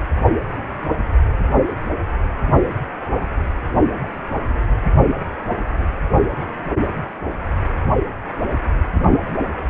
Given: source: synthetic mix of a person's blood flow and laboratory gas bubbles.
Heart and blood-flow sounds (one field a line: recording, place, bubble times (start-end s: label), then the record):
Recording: Doppler ultrasound of blood flow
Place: precordium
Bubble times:
8.94-9.21 s: bubbles
From the record:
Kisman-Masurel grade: 111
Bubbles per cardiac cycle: 1 to 2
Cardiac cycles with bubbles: 1 to 10%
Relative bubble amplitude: barely perceptible (0.100 to 0.250)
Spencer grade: 1 (occasional bubble signal discernible with the cardiac motion signal, with majority of cardiac periods free of bubbles)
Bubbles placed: anywhere in the cardiac cycle